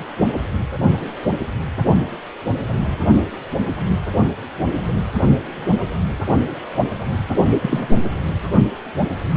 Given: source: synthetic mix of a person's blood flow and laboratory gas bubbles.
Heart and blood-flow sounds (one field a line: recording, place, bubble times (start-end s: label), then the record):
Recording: Doppler ultrasound of blood flow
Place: precordium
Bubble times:
7.62-7.88 s: bubbles
From the record:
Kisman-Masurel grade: 113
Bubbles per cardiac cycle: 1 to 2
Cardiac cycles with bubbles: 1 to 10%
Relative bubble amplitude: loud (0.450 to 0.775)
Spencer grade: 1 (occasional bubble signal discernible with the cardiac motion signal, with majority of cardiac periods free of bubbles)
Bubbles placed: only in the low amplitude regions of the cardiac cycle